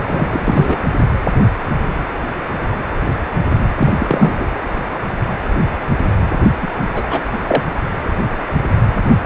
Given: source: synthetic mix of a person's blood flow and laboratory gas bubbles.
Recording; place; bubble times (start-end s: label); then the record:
Doppler ultrasound of blood flow; precordium
0.04-0.28 s: bubbles
0.31-0.77 s: bubbles
3.77-3.93 s: bubbles
3.98-4.34 s: bubbles
4.38-4.47 s: bubbles
6.62-6.67 s: bubbles
6.94-7.22 s: bubbles
7.33-7.39 s: bubbles
7.47-7.62 s: bubbles
From the record:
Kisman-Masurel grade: 223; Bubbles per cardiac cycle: several, 3 to 8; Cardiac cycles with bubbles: 10 to 50%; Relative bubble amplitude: loud (0.450 to 0.775); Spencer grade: 2 (many but less than half of the cardiac periods contain bubble signals, singularly or in groups); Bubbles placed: anywhere in the cardiac cycle